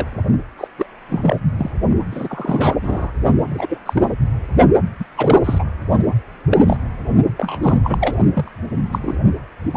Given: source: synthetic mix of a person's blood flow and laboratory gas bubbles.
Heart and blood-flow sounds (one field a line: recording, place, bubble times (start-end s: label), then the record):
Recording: Doppler ultrasound of blood flow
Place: precordium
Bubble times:
0.00-0.06 s: bubbles
0.57-0.68 s: bubbles
0.78-0.86 s: bubbles
1.09-1.36 s: bubbles
1.58-1.71 s: bubbles
2.12-2.75 s: bubbles
2.82-3.12 s: bubbles
3.49-3.79 s: bubbles
3.85-4.03 s: bubbles
4.99-5.04 s: bubbles
5.17-5.41 s: bubbles
5.44-5.65 s: bubbles
6.50-6.76 s: bubbles
7.38-7.79 s: bubbles
7.84-8.51 s: bubbles
8.92-8.98 s: bubbles
9.01-9.17 s: bubbles
9.71-9.76 s: bubbles
From the record:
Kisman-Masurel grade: 242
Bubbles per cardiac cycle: several, 3 to 8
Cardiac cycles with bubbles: 100%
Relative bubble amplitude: moderate (0.250 to 0.450)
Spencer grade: 3 (all of the cardiac periods contain showers or single bubble signals, but not dominating or overriding the cardiac motion signals)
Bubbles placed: only in the low amplitude regions of the cardiac cycle